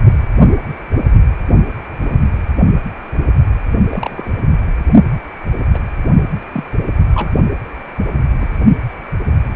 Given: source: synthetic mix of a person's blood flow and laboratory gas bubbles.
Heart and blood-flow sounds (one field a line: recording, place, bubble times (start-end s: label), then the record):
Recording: Doppler ultrasound of blood flow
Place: precordium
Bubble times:
2.02-2.17 s: bubbles
3.90-4.42 s: bubbles
5.73-5.79 s: bubbles
6.53-6.64 s: bubbles
7.14-7.31 s: bubbles
8.41-8.46 s: bubbles
From the record:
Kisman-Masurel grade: 122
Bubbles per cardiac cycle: 1 to 2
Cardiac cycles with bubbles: 10 to 50%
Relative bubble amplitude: moderate (0.250 to 0.450)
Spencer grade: 2 (many but less than half of the cardiac periods contain bubble signals, singularly or in groups)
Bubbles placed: only in the low amplitude regions of the cardiac cycle